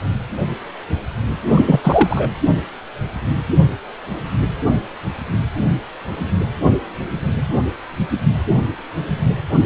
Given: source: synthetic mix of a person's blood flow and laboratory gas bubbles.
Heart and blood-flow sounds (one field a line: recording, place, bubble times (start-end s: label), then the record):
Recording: Doppler ultrasound of blood flow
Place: precordium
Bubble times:
1.55-1.80 s: bubbles
1.84-2.30 s: bubbles
From the record:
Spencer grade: 1 (occasional bubble signal discernible with the cardiac motion signal, with majority of cardiac periods free of bubbles)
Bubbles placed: anywhere in the cardiac cycle